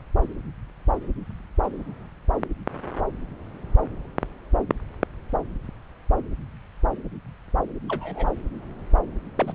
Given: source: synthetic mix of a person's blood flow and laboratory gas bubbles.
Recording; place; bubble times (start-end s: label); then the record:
Doppler ultrasound of blood flow; subclavian vein
1.62-1.70 s: bubbles
7.88-8.28 s: bubbles
9.36-9.54 s: bubbles
From the record:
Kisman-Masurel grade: 121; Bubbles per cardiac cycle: 1 to 2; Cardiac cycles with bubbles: 10 to 50%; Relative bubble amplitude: barely perceptible (0.100 to 0.250); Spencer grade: 2 (many but less than half of the cardiac periods contain bubble signals, singularly or in groups); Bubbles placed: anywhere in the cardiac cycle